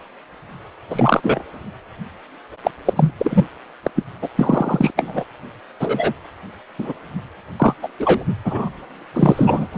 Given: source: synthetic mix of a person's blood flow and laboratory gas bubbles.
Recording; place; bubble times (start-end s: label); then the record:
Doppler ultrasound of blood flow; precordium
0.89-1.21 s: bubbles
1.23-1.42 s: bubbles
2.64-2.71 s: bubbles
2.85-2.93 s: bubbles
2.96-3.12 s: bubbles
3.20-3.45 s: bubbles
3.83-3.91 s: bubbles
3.96-4.04 s: bubbles
4.21-4.28 s: bubbles
4.36-4.92 s: bubbles
4.96-5.25 s: bubbles
5.79-6.13 s: bubbles
6.78-6.92 s: bubbles
7.59-7.74 s: bubbles
7.83-7.88 s: bubbles
7.99-8.23 s: bubbles
8.44-8.70 s: bubbles
9.13-9.67 s: bubbles
9.73-9.75 s: bubbles
From the record:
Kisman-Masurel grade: 233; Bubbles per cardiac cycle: several, 3 to 8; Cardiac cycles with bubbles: 50 to 99%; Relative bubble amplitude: loud (0.450 to 0.775); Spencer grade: 3 (all of the cardiac periods contain showers or single bubble signals, but not dominating or overriding the cardiac motion signals); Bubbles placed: anywhere in the cardiac cycle